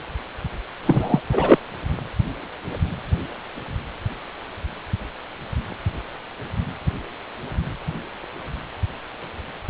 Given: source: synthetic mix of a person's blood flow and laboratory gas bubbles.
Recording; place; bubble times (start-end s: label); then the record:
Doppler ultrasound of blood flow; precordium
0.85-1.21 s: bubbles
1.31-1.58 s: bubbles
From the record:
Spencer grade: 1 (occasional bubble signal discernible with the cardiac motion signal, with majority of cardiac periods free of bubbles); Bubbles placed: anywhere in the cardiac cycle